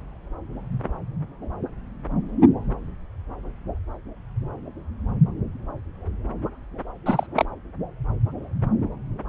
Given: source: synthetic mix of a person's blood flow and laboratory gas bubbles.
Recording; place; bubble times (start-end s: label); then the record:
Doppler ultrasound of blood flow; subclavian vein
7.06-7.27 s: bubbles
7.35-7.46 s: bubbles
From the record:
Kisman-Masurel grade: 222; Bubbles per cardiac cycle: several, 3 to 8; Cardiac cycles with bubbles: 10 to 50%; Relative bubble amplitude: moderate (0.250 to 0.450); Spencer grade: 2 (many but less than half of the cardiac periods contain bubble signals, singularly or in groups); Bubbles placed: anywhere in the cardiac cycle